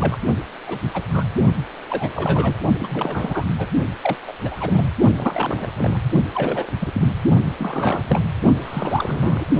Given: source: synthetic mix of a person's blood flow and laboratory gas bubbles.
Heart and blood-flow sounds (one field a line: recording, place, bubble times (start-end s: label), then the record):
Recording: Doppler ultrasound of blood flow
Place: precordium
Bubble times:
0.00-0.17 s: bubbles
0.66-0.79 s: bubbles
0.93-1.02 s: bubbles
1.10-1.24 s: bubbles
1.89-2.12 s: bubbles
2.15-2.54 s: bubbles
2.79-3.44 s: bubbles
3.58-3.68 s: bubbles
4.03-4.17 s: bubbles
4.28-4.33 s: bubbles
4.45-4.89 s: bubbles
5.17-5.67 s: bubbles
5.76-6.00 s: bubbles
6.34-6.69 s: bubbles
6.79-7.08 s: bubbles
7.59-8.04 s: bubbles
8.07-8.21 s: bubbles
8.61-9.46 s: bubbles
From the record:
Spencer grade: 3 (all of the cardiac periods contain showers or single bubble signals, but not dominating or overriding the cardiac motion signals)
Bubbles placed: only in the low amplitude regions of the cardiac cycle